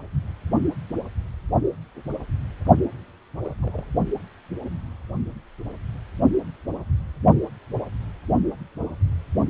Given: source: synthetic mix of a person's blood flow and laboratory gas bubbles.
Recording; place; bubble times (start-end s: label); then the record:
Doppler ultrasound of blood flow; precordium
3.43-3.54 s: bubbles
3.62-3.85 s: bubbles
From the record:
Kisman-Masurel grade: 111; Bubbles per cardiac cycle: 1 to 2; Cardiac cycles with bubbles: 1 to 10%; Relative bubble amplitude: barely perceptible (0.100 to 0.250); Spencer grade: 1 (occasional bubble signal discernible with the cardiac motion signal, with majority of cardiac periods free of bubbles); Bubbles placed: only in the low amplitude regions of the cardiac cycle